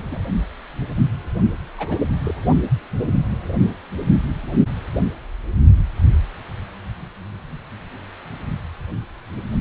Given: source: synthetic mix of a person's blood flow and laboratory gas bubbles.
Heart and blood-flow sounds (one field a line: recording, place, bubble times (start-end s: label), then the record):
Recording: Doppler ultrasound of blood flow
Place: precordium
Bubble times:
0.06-0.18 s: bubbles
1.78-2.00 s: bubbles
2.23-2.34 s: bubbles
From the record:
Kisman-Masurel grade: 121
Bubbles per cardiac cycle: 1 to 2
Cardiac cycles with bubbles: 10 to 50%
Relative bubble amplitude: barely perceptible (0.100 to 0.250)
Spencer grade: 2 (many but less than half of the cardiac periods contain bubble signals, singularly or in groups)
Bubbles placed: only in the low amplitude regions of the cardiac cycle